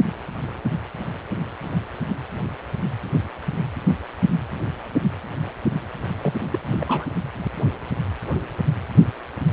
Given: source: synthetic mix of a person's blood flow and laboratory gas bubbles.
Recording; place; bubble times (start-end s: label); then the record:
Doppler ultrasound of blood flow; precordium
6.21-6.34 s: bubbles
6.50-6.59 s: bubbles
6.66-7.05 s: bubbles
From the record:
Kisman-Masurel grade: 221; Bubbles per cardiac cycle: several, 3 to 8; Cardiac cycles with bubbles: 10 to 50%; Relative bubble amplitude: barely perceptible (0.100 to 0.250); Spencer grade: 2 (many but less than half of the cardiac periods contain bubble signals, singularly or in groups); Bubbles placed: anywhere in the cardiac cycle